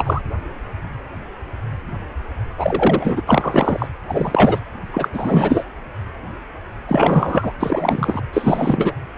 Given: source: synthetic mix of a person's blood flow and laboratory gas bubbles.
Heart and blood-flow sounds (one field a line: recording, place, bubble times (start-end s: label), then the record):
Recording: Doppler ultrasound of blood flow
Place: precordium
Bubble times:
0.00-0.22 s: bubbles
2.57-3.21 s: bubbles
3.27-3.88 s: bubbles
4.09-4.60 s: bubbles
4.93-5.08 s: bubbles
5.12-5.64 s: bubbles
6.88-7.52 s: bubbles
7.60-8.21 s: bubbles
8.33-8.95 s: bubbles
From the record:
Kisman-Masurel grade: 333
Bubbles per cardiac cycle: rolling drumbeat, 9 or more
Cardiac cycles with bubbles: 50 to 99%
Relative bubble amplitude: loud (0.450 to 0.775)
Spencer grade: 3 (all of the cardiac periods contain showers or single bubble signals, but not dominating or overriding the cardiac motion signals)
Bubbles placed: anywhere in the cardiac cycle